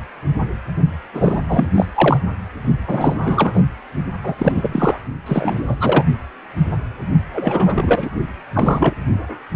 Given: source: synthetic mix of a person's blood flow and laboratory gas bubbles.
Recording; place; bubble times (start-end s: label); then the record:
Doppler ultrasound of blood flow; precordium
1.13-1.42 s: bubbles
1.48-1.67 s: bubbles
1.75-1.85 s: bubbles
1.96-2.17 s: bubbles
2.86-3.65 s: bubbles
4.23-4.35 s: bubbles
4.38-4.98 s: bubbles
5.26-5.77 s: bubbles
5.80-6.04 s: bubbles
7.33-8.09 s: bubbles
8.53-8.94 s: bubbles
From the record:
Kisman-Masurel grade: 333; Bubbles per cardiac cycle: rolling drumbeat, 9 or more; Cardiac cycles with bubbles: 50 to 99%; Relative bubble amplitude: loud (0.450 to 0.775); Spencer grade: 3 (all of the cardiac periods contain showers or single bubble signals, but not dominating or overriding the cardiac motion signals); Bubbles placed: only in the low amplitude regions of the cardiac cycle